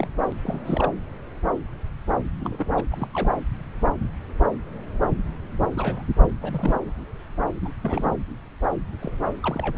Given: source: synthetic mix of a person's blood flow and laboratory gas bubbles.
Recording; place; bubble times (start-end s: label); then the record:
Doppler ultrasound of blood flow; subclavian vein
0.00-0.10 s: bubbles
0.30-0.33 s: bubbles
0.43-0.60 s: bubbles
0.66-0.93 s: bubbles
2.40-2.83 s: bubbles
2.91-3.07 s: bubbles
3.13-3.33 s: bubbles
5.77-6.03 s: bubbles
6.41-6.79 s: bubbles
7.61-7.71 s: bubbles
7.83-8.12 s: bubbles
9.02-9.11 s: bubbles
9.43-9.78 s: bubbles
From the record:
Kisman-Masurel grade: 221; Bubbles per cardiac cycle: several, 3 to 8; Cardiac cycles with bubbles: 10 to 50%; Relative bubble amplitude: barely perceptible (0.100 to 0.250); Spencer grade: 2 (many but less than half of the cardiac periods contain bubble signals, singularly or in groups); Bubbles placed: anywhere in the cardiac cycle